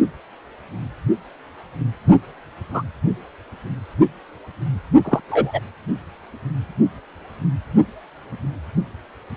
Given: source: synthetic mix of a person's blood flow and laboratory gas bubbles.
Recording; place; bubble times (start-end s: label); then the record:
Doppler ultrasound of blood flow; precordium
2.73-2.83 s: bubbles
5.04-5.21 s: bubbles
5.29-5.59 s: bubbles
From the record:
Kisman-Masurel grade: 123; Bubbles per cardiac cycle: 1 to 2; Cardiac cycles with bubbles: 10 to 50%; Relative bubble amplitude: loud (0.450 to 0.775); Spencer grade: 2 (many but less than half of the cardiac periods contain bubble signals, singularly or in groups); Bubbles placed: only in the low amplitude regions of the cardiac cycle